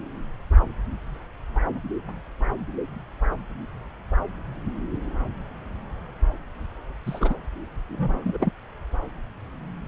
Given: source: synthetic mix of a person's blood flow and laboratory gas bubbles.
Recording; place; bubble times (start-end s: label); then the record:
Doppler ultrasound of blood flow; subclavian vein
7.06-7.35 s: bubbles
7.89-8.52 s: bubbles
From the record:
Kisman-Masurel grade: 212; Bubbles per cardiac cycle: several, 3 to 8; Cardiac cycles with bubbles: 1 to 10%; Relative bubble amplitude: moderate (0.250 to 0.450); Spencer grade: 1 (occasional bubble signal discernible with the cardiac motion signal, with majority of cardiac periods free of bubbles); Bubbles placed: anywhere in the cardiac cycle